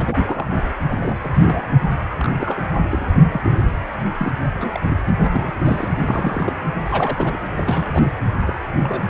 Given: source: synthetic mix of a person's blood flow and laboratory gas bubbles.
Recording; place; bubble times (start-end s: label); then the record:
Doppler ultrasound of blood flow; precordium
0.00-0.74 s: bubbles
0.89-1.69 s: bubbles
2.19-2.67 s: bubbles
2.90-3.06 s: bubbles
3.32-3.62 s: bubbles
4.18-4.29 s: bubbles
4.41-4.45 s: bubbles
4.61-4.80 s: bubbles
5.18-5.51 s: bubbles
5.59-5.91 s: bubbles
5.99-6.53 s: bubbles
6.85-7.37 s: bubbles
7.58-8.11 s: bubbles
8.46-8.53 s: bubbles
8.77-9.04 s: bubbles
From the record:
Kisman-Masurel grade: 242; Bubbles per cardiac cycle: several, 3 to 8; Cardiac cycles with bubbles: 100%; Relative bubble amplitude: moderate (0.250 to 0.450); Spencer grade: 3 (all of the cardiac periods contain showers or single bubble signals, but not dominating or overriding the cardiac motion signals); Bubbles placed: anywhere in the cardiac cycle